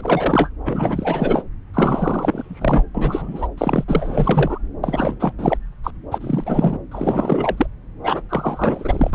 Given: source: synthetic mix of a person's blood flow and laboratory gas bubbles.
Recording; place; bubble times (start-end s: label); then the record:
Doppler ultrasound of blood flow; subclavian vein
0.00-0.49 s: bubbles
0.66-1.43 s: bubbles
1.73-2.84 s: bubbles
2.94-3.48 s: bubbles
3.57-3.84 s: bubbles
3.88-4.58 s: bubbles
4.83-5.17 s: bubbles
5.19-5.32 s: bubbles
5.38-5.57 s: bubbles
5.83-5.91 s: bubbles
6.11-6.77 s: bubbles
6.91-7.67 s: bubbles
8.04-8.22 s: bubbles
8.29-9.11 s: bubbles
9.13-9.15 s: bubbles
From the record:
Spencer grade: 3 (all of the cardiac periods contain showers or single bubble signals, but not dominating or overriding the cardiac motion signals); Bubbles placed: anywhere in the cardiac cycle